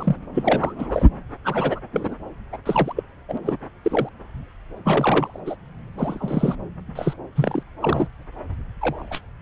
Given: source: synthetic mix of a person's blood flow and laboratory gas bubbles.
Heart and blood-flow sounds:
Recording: Doppler ultrasound of blood flow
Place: subclavian vein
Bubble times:
0.00-0.16 s: bubbles
0.34-0.73 s: bubbles
0.79-1.05 s: bubbles
1.45-1.80 s: bubbles
1.92-2.15 s: bubbles
2.52-2.57 s: bubbles
2.66-2.93 s: bubbles
2.96-3.03 s: bubbles
3.29-3.38 s: bubbles
3.44-3.57 s: bubbles
3.84-4.09 s: bubbles
4.84-5.38 s: bubbles
5.46-5.55 s: bubbles
5.97-6.55 s: bubbles
6.95-7.13 s: bubbles
7.36-7.63 s: bubbles
7.81-8.08 s: bubbles
8.81-9.21 s: bubbles
From the record:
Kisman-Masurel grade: 242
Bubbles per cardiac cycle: several, 3 to 8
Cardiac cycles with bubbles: 100%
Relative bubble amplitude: moderate (0.250 to 0.450)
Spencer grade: 3 (all of the cardiac periods contain showers or single bubble signals, but not dominating or overriding the cardiac motion signals)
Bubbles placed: anywhere in the cardiac cycle

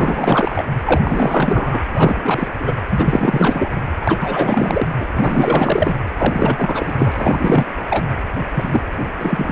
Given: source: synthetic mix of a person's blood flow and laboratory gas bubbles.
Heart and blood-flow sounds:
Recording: Doppler ultrasound of blood flow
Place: precordium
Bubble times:
0.00-0.64 s: bubbles
0.85-1.81 s: bubbles
1.95-2.48 s: bubbles
2.60-2.74 s: bubbles
2.89-3.72 s: bubbles
4.00-4.87 s: bubbles
5.00-5.07 s: bubbles
5.14-5.94 s: bubbles
6.18-7.65 s: bubbles
7.90-8.05 s: bubbles
8.54-8.82 s: bubbles
9.18-9.52 s: bubbles
From the record:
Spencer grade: 4 (maximum detectable bubble signal sounding continuously throughout systole and diastole of every cardiac period, and overriding the amplitude of the normal cardiac signals)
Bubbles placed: anywhere in the cardiac cycle

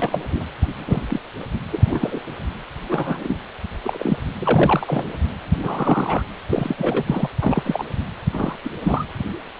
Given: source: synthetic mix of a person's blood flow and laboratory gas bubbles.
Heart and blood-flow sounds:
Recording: Doppler ultrasound of blood flow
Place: precordium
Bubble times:
0.00-0.45 s: bubbles
0.77-1.03 s: bubbles
1.10-1.20 s: bubbles
1.72-2.19 s: bubbles
2.89-3.40 s: bubbles
3.83-4.18 s: bubbles
4.36-5.05 s: bubbles
5.62-6.23 s: bubbles
6.49-7.28 s: bubbles
7.42-7.84 s: bubbles
8.31-8.55 s: bubbles
8.64-8.69 s: bubbles
8.82-9.05 s: bubbles
From the record:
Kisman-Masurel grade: 232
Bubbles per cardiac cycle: several, 3 to 8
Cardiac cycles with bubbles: 50 to 99%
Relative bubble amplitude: moderate (0.250 to 0.450)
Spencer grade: 3 (all of the cardiac periods contain showers or single bubble signals, but not dominating or overriding the cardiac motion signals)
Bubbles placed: anywhere in the cardiac cycle

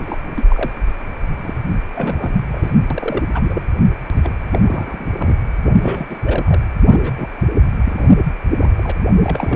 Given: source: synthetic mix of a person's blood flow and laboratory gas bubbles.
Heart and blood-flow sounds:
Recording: Doppler ultrasound of blood flow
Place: precordium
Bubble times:
0.00-0.18 s: bubbles
0.35-0.72 s: bubbles
1.41-1.54 s: bubbles
1.94-2.46 s: bubbles
2.51-2.75 s: bubbles
2.90-3.23 s: bubbles
3.30-3.62 s: bubbles
4.15-4.29 s: bubbles
4.53-4.59 s: bubbles
4.62-5.11 s: bubbles
5.17-5.37 s: bubbles
5.62-6.07 s: bubbles
6.10-6.20 s: bubbles
6.23-6.61 s: bubbles
6.90-7.29 s: bubbles
7.85-8.11 s: bubbles
8.61-8.70 s: bubbles
8.78-8.92 s: bubbles
9.22-9.56 s: bubbles
From the record:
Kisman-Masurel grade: 242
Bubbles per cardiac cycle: several, 3 to 8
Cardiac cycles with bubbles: 100%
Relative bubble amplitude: moderate (0.250 to 0.450)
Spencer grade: 3 (all of the cardiac periods contain showers or single bubble signals, but not dominating or overriding the cardiac motion signals)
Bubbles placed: anywhere in the cardiac cycle

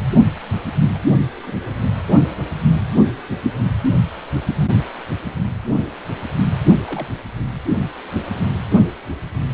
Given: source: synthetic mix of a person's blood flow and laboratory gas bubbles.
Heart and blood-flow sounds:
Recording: Doppler ultrasound of blood flow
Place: precordium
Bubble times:
0.94-0.98 s: bubbles
1.43-1.53 s: bubbles
6.88-7.08 s: bubbles
From the record:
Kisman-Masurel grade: 121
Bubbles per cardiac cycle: 1 to 2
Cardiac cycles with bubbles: 10 to 50%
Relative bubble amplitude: barely perceptible (0.100 to 0.250)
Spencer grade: 2 (many but less than half of the cardiac periods contain bubble signals, singularly or in groups)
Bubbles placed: only in the low amplitude regions of the cardiac cycle

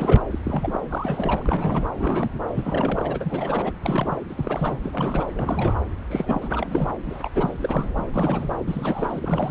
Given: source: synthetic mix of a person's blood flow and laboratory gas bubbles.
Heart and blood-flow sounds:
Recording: Doppler ultrasound of blood flow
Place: subclavian vein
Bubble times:
0.00-0.25 s: bubbles
0.30-0.39 s: bubbles
0.43-0.80 s: bubbles
0.90-1.43 s: bubbles
1.45-1.86 s: bubbles
1.94-2.29 s: bubbles
2.33-2.41 s: bubbles
2.55-3.72 s: bubbles
3.81-4.18 s: bubbles
4.28-4.78 s: bubbles
4.82-5.25 s: bubbles
5.35-5.75 s: bubbles
6.09-6.48 s: bubbles
6.50-6.91 s: bubbles
7.05-7.29 s: bubbles
7.34-8.05 s: bubbles
8.12-8.56 s: bubbles
8.65-9.51 s: bubbles
From the record:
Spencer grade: 3 (all of the cardiac periods contain showers or single bubble signals, but not dominating or overriding the cardiac motion signals)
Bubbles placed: anywhere in the cardiac cycle

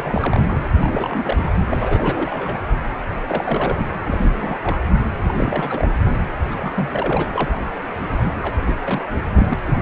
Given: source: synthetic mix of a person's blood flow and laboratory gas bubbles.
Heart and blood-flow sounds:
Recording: Doppler ultrasound of blood flow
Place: precordium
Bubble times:
0.00-0.57 s: bubbles
0.76-1.52 s: bubbles
1.71-2.58 s: bubbles
3.27-3.85 s: bubbles
4.05-4.60 s: bubbles
4.62-4.81 s: bubbles
5.28-5.96 s: bubbles
6.50-6.90 s: bubbles
6.93-7.31 s: bubbles
7.35-7.52 s: bubbles
8.09-8.34 s: bubbles
8.41-8.79 s: bubbles
8.84-9.02 s: bubbles
9.12-9.54 s: bubbles
9.66-9.73 s: bubbles
From the record:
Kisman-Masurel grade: 342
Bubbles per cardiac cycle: rolling drumbeat, 9 or more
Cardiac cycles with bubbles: 100%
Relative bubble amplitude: moderate (0.250 to 0.450)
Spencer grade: 3 (all of the cardiac periods contain showers or single bubble signals, but not dominating or overriding the cardiac motion signals)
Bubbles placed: anywhere in the cardiac cycle

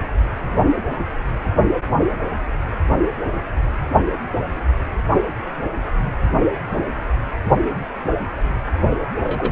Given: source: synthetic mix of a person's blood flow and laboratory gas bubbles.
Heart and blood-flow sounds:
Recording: Doppler ultrasound of blood flow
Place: precordium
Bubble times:
9.23-9.51 s: bubbles
From the record:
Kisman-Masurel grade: 212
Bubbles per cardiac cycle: several, 3 to 8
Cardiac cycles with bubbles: 1 to 10%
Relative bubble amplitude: moderate (0.250 to 0.450)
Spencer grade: 1 (occasional bubble signal discernible with the cardiac motion signal, with majority of cardiac periods free of bubbles)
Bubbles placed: only in the low amplitude regions of the cardiac cycle

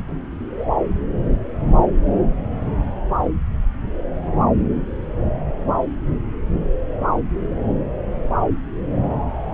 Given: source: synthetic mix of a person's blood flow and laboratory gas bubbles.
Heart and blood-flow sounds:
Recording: Doppler ultrasound of blood flow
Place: subclavian vein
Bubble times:
0.58-0.65 s: bubbles
From the record:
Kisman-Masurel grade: 111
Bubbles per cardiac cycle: 1 to 2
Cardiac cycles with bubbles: 1 to 10%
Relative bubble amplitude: barely perceptible (0.100 to 0.250)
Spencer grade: 1 (occasional bubble signal discernible with the cardiac motion signal, with majority of cardiac periods free of bubbles)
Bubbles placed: anywhere in the cardiac cycle

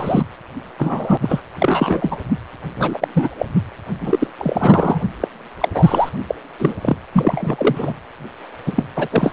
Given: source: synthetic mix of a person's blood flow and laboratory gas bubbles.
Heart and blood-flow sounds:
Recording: Doppler ultrasound of blood flow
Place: precordium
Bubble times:
0.00-0.26 s: bubbles
0.78-1.18 s: bubbles
1.22-1.40 s: bubbles
1.59-2.17 s: bubbles
2.77-3.08 s: bubbles
3.13-3.28 s: bubbles
3.38-3.46 s: bubbles
4.00-4.27 s: bubbles
4.38-5.01 s: bubbles
5.20-5.28 s: bubbles
5.60-5.68 s: bubbles
5.73-6.09 s: bubbles
6.28-6.34 s: bubbles
6.59-6.73 s: bubbles
6.81-6.96 s: bubbles
7.13-7.93 s: bubbles
8.66-8.83 s: bubbles
8.96-9.33 s: bubbles
From the record:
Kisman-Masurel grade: 333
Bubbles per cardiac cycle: rolling drumbeat, 9 or more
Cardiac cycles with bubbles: 50 to 99%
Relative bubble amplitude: loud (0.450 to 0.775)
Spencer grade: 3 (all of the cardiac periods contain showers or single bubble signals, but not dominating or overriding the cardiac motion signals)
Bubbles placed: anywhere in the cardiac cycle

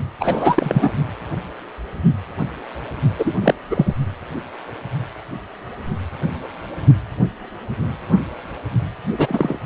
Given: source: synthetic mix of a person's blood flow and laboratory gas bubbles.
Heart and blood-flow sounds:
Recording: Doppler ultrasound of blood flow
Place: precordium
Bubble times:
0.19-0.91 s: bubbles
3.19-3.34 s: bubbles
3.41-3.56 s: bubbles
3.70-3.94 s: bubbles
9.18-9.59 s: bubbles
From the record:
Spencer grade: 2 (many but less than half of the cardiac periods contain bubble signals, singularly or in groups)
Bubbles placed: only in the low amplitude regions of the cardiac cycle

